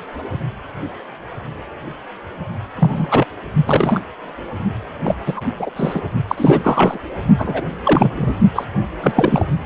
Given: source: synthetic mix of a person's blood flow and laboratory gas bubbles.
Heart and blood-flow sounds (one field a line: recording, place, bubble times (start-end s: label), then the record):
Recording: Doppler ultrasound of blood flow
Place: precordium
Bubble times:
2.76-3.27 s: bubbles
3.67-4.00 s: bubbles
5.04-5.15 s: bubbles
5.25-5.34 s: bubbles
5.36-5.41 s: bubbles
5.58-5.70 s: bubbles
5.76-6.02 s: bubbles
6.27-6.98 s: bubbles
7.38-7.65 s: bubbles
7.83-8.34 s: bubbles
8.55-8.65 s: bubbles
9.01-9.12 s: bubbles
9.15-9.46 s: bubbles
From the record:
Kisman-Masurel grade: 233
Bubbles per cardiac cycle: several, 3 to 8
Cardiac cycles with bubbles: 50 to 99%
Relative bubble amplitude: loud (0.450 to 0.775)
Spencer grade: 3 (all of the cardiac periods contain showers or single bubble signals, but not dominating or overriding the cardiac motion signals)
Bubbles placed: only in the low amplitude regions of the cardiac cycle